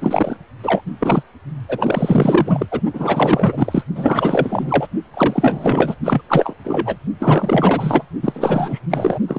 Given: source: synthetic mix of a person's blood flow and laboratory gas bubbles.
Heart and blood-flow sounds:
Doppler ultrasound of blood flow; precordium
0.00-0.37 s: bubbles
0.62-0.81 s: bubbles
1.00-1.23 s: bubbles
1.69-2.67 s: bubbles
2.71-2.81 s: bubbles
2.93-3.83 s: bubbles
3.94-4.88 s: bubbles
5.13-5.95 s: bubbles
6.03-6.21 s: bubbles
6.28-6.54 s: bubbles
6.64-6.98 s: bubbles
7.19-8.03 s: bubbles
8.22-8.80 s: bubbles
8.90-9.19 s: bubbles
9.27-9.39 s: bubbles
From the record:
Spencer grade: 4 (maximum detectable bubble signal sounding continuously throughout systole and diastole of every cardiac period, and overriding the amplitude of the normal cardiac signals); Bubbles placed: only in the low amplitude regions of the cardiac cycle

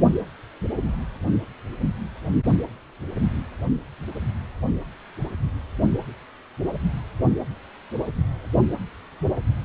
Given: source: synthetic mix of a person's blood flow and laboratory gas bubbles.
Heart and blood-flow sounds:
Doppler ultrasound of blood flow; precordium
no bubbles
From the record:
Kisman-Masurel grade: 000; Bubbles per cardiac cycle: 0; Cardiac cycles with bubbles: 0%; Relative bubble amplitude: no bubbles discernible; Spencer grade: 0 (complete lack of bubble signals)

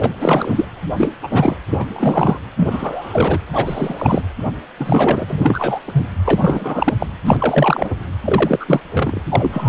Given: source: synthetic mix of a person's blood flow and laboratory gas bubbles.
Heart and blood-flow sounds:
Doppler ultrasound of blood flow; precordium
0.00-0.17 s: bubbles
0.21-0.65 s: bubbles
0.96-1.11 s: bubbles
1.22-1.27 s: bubbles
1.30-1.56 s: bubbles
1.69-2.39 s: bubbles
2.56-3.39 s: bubbles
3.53-4.22 s: bubbles
4.45-4.52 s: bubbles
4.77-5.79 s: bubbles
5.87-6.04 s: bubbles
6.25-6.94 s: bubbles
6.99-7.07 s: bubbles
7.27-7.94 s: bubbles
8.24-8.80 s: bubbles
8.93-9.21 s: bubbles
9.29-9.69 s: bubbles
From the record:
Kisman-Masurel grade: 343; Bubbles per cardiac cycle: rolling drumbeat, 9 or more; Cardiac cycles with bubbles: 100%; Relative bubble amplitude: loud (0.450 to 0.775); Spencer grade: 3 (all of the cardiac periods contain showers or single bubble signals, but not dominating or overriding the cardiac motion signals); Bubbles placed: anywhere in the cardiac cycle

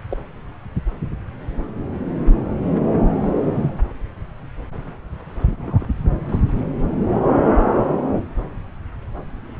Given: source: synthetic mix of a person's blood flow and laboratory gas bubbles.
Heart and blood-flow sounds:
Doppler ultrasound of blood flow; subclavian vein
0.10-0.17 s: bubbles
3.21-3.79 s: bubbles
5.48-5.85 s: bubbles
6.29-6.39 s: bubbles
From the record:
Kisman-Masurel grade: 121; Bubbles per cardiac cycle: 1 to 2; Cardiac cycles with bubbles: 10 to 50%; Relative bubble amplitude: barely perceptible (0.100 to 0.250); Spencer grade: 2 (many but less than half of the cardiac periods contain bubble signals, singularly or in groups); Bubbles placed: anywhere in the cardiac cycle

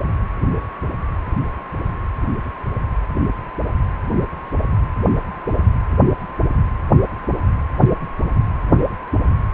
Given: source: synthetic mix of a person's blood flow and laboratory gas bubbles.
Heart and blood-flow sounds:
Doppler ultrasound of blood flow; precordium
no bubbles
From the record:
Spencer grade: 0 (complete lack of bubble signals)

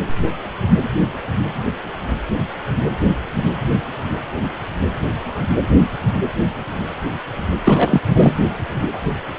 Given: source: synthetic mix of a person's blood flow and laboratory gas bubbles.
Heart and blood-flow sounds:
Doppler ultrasound of blood flow; precordium
7.63-8.01 s: bubbles
8.14-8.34 s: bubbles
From the record:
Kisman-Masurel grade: 223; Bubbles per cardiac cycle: several, 3 to 8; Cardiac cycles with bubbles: 10 to 50%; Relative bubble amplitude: loud (0.450 to 0.775); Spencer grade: 2 (many but less than half of the cardiac periods contain bubble signals, singularly or in groups); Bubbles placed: anywhere in the cardiac cycle

